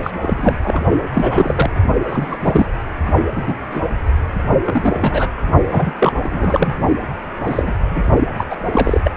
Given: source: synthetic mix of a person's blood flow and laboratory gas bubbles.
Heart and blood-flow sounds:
Doppler ultrasound of blood flow; precordium
0.03-0.11 s: bubbles
0.22-0.83 s: bubbles
1.15-1.70 s: bubbles
2.07-2.38 s: bubbles
2.40-2.67 s: bubbles
3.35-3.44 s: bubbles
3.46-3.54 s: bubbles
3.71-3.80 s: bubbles
4.64-5.29 s: bubbles
5.71-5.93 s: bubbles
5.99-6.13 s: bubbles
6.21-6.72 s: bubbles
7.45-7.73 s: bubbles
7.91-8.02 s: bubbles
8.37-8.45 s: bubbles
8.50-8.57 s: bubbles
8.72-9.01 s: bubbles
9.04-9.15 s: bubbles
From the record:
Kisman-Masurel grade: 242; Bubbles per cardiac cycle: several, 3 to 8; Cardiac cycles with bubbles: 100%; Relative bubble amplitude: moderate (0.250 to 0.450); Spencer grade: 3 (all of the cardiac periods contain showers or single bubble signals, but not dominating or overriding the cardiac motion signals); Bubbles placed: only in the low amplitude regions of the cardiac cycle

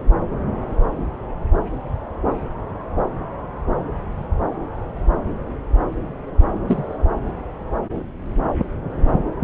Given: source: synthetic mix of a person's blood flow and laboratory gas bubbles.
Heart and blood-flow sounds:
Doppler ultrasound of blood flow; subclavian vein
6.67-6.96 s: bubbles
From the record:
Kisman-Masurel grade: 112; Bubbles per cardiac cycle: 1 to 2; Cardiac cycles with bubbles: 1 to 10%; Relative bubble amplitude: moderate (0.250 to 0.450); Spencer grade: 1 (occasional bubble signal discernible with the cardiac motion signal, with majority of cardiac periods free of bubbles); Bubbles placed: anywhere in the cardiac cycle

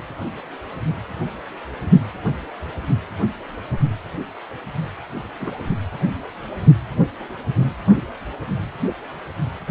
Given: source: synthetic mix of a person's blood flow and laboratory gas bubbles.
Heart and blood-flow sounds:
Doppler ultrasound of blood flow; precordium
5.40-5.54 s: bubbles
From the record:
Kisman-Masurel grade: 221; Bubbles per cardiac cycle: several, 3 to 8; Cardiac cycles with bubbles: 10 to 50%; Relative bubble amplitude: barely perceptible (0.100 to 0.250); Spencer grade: 2 (many but less than half of the cardiac periods contain bubble signals, singularly or in groups); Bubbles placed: only in the low amplitude regions of the cardiac cycle

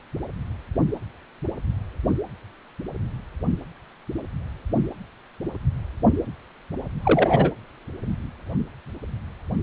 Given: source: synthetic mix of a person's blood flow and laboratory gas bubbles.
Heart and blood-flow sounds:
Doppler ultrasound of blood flow; precordium
7.04-7.52 s: bubbles
From the record:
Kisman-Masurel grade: 213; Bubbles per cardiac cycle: several, 3 to 8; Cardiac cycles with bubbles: 1 to 10%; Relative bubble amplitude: loud (0.450 to 0.775); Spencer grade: 1 (occasional bubble signal discernible with the cardiac motion signal, with majority of cardiac periods free of bubbles); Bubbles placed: anywhere in the cardiac cycle

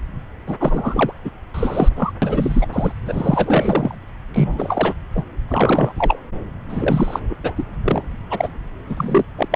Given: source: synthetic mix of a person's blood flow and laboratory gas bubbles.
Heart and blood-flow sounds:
Doppler ultrasound of blood flow; subclavian vein
0.46-0.56 s: bubbles
0.59-1.12 s: bubbles
1.25-1.31 s: bubbles
1.54-1.89 s: bubbles
1.96-2.11 s: bubbles
2.22-2.67 s: bubbles
2.73-2.92 s: bubbles
3.05-3.98 s: bubbles
4.33-4.95 s: bubbles
5.15-5.24 s: bubbles
5.48-5.93 s: bubbles
5.97-6.21 s: bubbles
6.69-7.20 s: bubbles
7.43-7.53 s: bubbles
7.56-7.65 s: bubbles
7.83-8.02 s: bubbles
8.30-8.48 s: bubbles
8.89-9.23 s: bubbles
9.37-9.56 s: bubbles
From the record:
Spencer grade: 3 (all of the cardiac periods contain showers or single bubble signals, but not dominating or overriding the cardiac motion signals); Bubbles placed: anywhere in the cardiac cycle

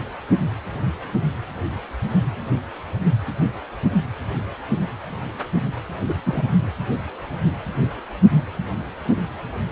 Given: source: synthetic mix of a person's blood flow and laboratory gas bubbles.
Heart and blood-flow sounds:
Doppler ultrasound of blood flow; precordium
6.08-6.13 s: bubbles
6.26-6.42 s: bubbles
From the record:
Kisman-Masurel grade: 113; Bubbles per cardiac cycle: 1 to 2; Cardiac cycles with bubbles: 1 to 10%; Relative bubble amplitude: loud (0.450 to 0.775); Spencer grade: 1 (occasional bubble signal discernible with the cardiac motion signal, with majority of cardiac periods free of bubbles); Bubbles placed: anywhere in the cardiac cycle

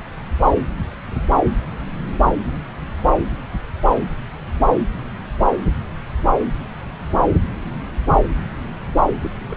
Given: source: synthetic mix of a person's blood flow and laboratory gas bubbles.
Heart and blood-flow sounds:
Doppler ultrasound of blood flow; subclavian vein
9.22-9.30 s: bubbles
9.40-9.57 s: bubbles
From the record:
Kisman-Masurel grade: 211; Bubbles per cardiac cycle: several, 3 to 8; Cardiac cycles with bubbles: 1 to 10%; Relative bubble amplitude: barely perceptible (0.100 to 0.250); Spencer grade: 1 (occasional bubble signal discernible with the cardiac motion signal, with majority of cardiac periods free of bubbles); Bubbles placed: anywhere in the cardiac cycle

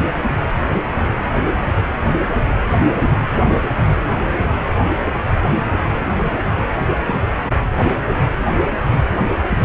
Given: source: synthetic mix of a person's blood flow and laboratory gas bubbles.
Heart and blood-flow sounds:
Doppler ultrasound of blood flow; precordium
4.59-4.68 s: bubbles
From the record:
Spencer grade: 1 (occasional bubble signal discernible with the cardiac motion signal, with majority of cardiac periods free of bubbles); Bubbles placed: anywhere in the cardiac cycle

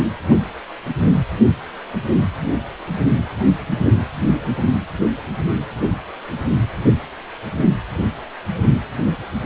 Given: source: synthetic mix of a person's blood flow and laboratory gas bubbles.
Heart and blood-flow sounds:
Doppler ultrasound of blood flow; precordium
0.30-0.37 s: bubbles
From the record:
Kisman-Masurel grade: 121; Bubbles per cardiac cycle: 1 to 2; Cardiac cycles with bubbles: 10 to 50%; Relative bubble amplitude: barely perceptible (0.100 to 0.250); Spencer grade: 2 (many but less than half of the cardiac periods contain bubble signals, singularly or in groups); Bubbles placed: only in the low amplitude regions of the cardiac cycle

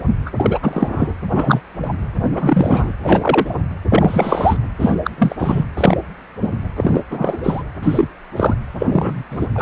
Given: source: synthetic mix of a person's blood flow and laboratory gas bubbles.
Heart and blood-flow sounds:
Doppler ultrasound of blood flow; precordium
0.25-0.30 s: bubbles
0.36-0.58 s: bubbles
0.62-1.14 s: bubbles
1.35-1.60 s: bubbles
1.82-1.94 s: bubbles
2.31-2.92 s: bubbles
3.02-3.60 s: bubbles
3.90-4.58 s: bubbles
4.79-4.95 s: bubbles
5.04-5.11 s: bubbles
5.18-5.36 s: bubbles
5.39-5.64 s: bubbles
5.77-5.98 s: bubbles
6.41-6.51 s: bubbles
6.76-7.01 s: bubbles
7.10-7.37 s: bubbles
7.44-7.62 s: bubbles
7.83-8.08 s: bubbles
8.36-8.54 s: bubbles
8.79-9.24 s: bubbles
9.30-9.47 s: bubbles
9.54-9.61 s: bubbles
From the record:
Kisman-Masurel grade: 233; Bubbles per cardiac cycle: several, 3 to 8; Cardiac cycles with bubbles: 50 to 99%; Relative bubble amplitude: loud (0.450 to 0.775); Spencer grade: 3 (all of the cardiac periods contain showers or single bubble signals, but not dominating or overriding the cardiac motion signals); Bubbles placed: anywhere in the cardiac cycle

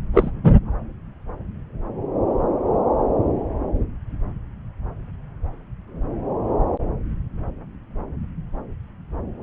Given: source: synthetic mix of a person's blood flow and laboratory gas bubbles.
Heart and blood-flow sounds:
Doppler ultrasound of blood flow; subclavian vein
0.14-0.30 s: bubbles
0.44-0.53 s: bubbles
From the record:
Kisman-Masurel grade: 123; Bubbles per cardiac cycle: 1 to 2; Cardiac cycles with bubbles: 10 to 50%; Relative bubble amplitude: loud (0.450 to 0.775); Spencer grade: 2 (many but less than half of the cardiac periods contain bubble signals, singularly or in groups); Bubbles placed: anywhere in the cardiac cycle

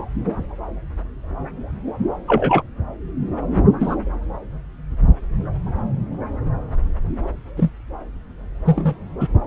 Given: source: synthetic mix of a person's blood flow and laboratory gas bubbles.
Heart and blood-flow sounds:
Doppler ultrasound of blood flow; subclavian vein
2.27-2.62 s: bubbles
3.80-3.97 s: bubbles
7.57-7.70 s: bubbles
8.65-8.95 s: bubbles
9.20-9.28 s: bubbles
From the record:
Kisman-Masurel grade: 123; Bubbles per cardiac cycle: 1 to 2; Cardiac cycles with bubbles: 10 to 50%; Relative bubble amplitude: loud (0.450 to 0.775); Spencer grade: 2 (many but less than half of the cardiac periods contain bubble signals, singularly or in groups); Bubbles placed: anywhere in the cardiac cycle

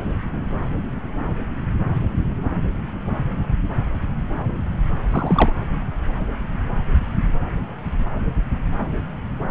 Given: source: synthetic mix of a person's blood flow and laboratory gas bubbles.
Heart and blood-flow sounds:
Doppler ultrasound of blood flow; subclavian vein
5.10-5.52 s: bubbles
From the record:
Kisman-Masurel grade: 213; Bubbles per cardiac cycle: several, 3 to 8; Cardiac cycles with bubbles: 1 to 10%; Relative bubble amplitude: loud (0.450 to 0.775); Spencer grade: 1 (occasional bubble signal discernible with the cardiac motion signal, with majority of cardiac periods free of bubbles); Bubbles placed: anywhere in the cardiac cycle

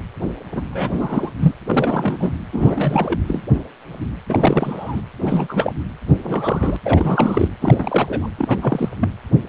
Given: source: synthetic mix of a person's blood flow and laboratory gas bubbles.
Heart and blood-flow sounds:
Doppler ultrasound of blood flow; precordium
0.55-0.63 s: bubbles
0.72-1.31 s: bubbles
1.39-1.54 s: bubbles
1.66-2.31 s: bubbles
2.52-3.19 s: bubbles
3.27-3.42 s: bubbles
4.28-5.01 s: bubbles
5.24-5.72 s: bubbles
6.06-6.17 s: bubbles
6.23-6.76 s: bubbles
6.83-7.48 s: bubbles
7.60-8.29 s: bubbles
8.38-8.58 s: bubbles
8.62-8.89 s: bubbles
8.99-9.08 s: bubbles
From the record:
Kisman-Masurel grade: 332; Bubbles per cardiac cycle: rolling drumbeat, 9 or more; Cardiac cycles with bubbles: 50 to 99%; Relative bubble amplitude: moderate (0.250 to 0.450); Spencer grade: 3 (all of the cardiac periods contain showers or single bubble signals, but not dominating or overriding the cardiac motion signals); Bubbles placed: anywhere in the cardiac cycle

